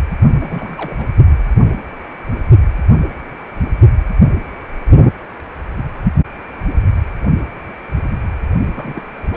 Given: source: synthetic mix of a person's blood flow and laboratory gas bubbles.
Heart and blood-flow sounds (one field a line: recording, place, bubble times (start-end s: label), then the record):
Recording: Doppler ultrasound of blood flow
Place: precordium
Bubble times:
0.40-1.06 s: bubbles
8.73-9.03 s: bubbles
9.26-9.36 s: bubbles
From the record:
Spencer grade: 2 (many but less than half of the cardiac periods contain bubble signals, singularly or in groups)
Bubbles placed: only in the low amplitude regions of the cardiac cycle